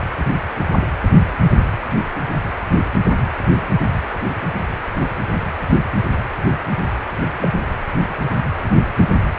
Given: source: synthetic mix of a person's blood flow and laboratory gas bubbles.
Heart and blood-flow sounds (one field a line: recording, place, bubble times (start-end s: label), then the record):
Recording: Doppler ultrasound of blood flow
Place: precordium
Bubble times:
7.39-7.49 s: bubbles
From the record:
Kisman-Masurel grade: 111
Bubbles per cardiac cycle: 1 to 2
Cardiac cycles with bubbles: 1 to 10%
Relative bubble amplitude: barely perceptible (0.100 to 0.250)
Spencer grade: 1 (occasional bubble signal discernible with the cardiac motion signal, with majority of cardiac periods free of bubbles)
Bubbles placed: anywhere in the cardiac cycle